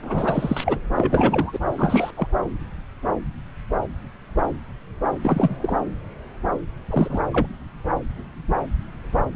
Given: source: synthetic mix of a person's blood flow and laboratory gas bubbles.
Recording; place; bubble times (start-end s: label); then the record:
Doppler ultrasound of blood flow; subclavian vein
0.03-0.79 s: bubbles
0.96-1.58 s: bubbles
1.71-2.10 s: bubbles
2.17-2.27 s: bubbles
5.21-5.56 s: bubbles
5.62-5.76 s: bubbles
6.87-7.19 s: bubbles
7.32-7.46 s: bubbles
From the record:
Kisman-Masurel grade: 222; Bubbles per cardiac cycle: several, 3 to 8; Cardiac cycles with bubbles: 10 to 50%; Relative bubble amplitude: moderate (0.250 to 0.450); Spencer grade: 2 (many but less than half of the cardiac periods contain bubble signals, singularly or in groups); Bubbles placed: anywhere in the cardiac cycle